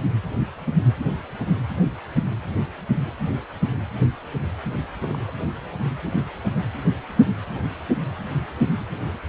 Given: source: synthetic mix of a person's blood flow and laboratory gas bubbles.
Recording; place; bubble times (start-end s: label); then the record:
Doppler ultrasound of blood flow; precordium
5.01-5.31 s: bubbles
From the record:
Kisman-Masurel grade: 111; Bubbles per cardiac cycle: 1 to 2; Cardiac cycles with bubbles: 1 to 10%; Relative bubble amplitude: barely perceptible (0.100 to 0.250); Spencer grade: 1 (occasional bubble signal discernible with the cardiac motion signal, with majority of cardiac periods free of bubbles); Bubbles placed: anywhere in the cardiac cycle